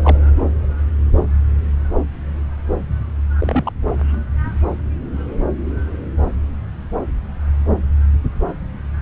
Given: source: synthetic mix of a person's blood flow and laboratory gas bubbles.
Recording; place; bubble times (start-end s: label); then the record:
Doppler ultrasound of blood flow; subclavian vein
0.02-0.17 s: bubbles
3.39-3.72 s: bubbles
From the record:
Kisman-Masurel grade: 112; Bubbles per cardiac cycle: 1 to 2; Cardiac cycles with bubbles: 1 to 10%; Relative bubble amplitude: moderate (0.250 to 0.450); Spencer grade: 1 (occasional bubble signal discernible with the cardiac motion signal, with majority of cardiac periods free of bubbles); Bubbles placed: anywhere in the cardiac cycle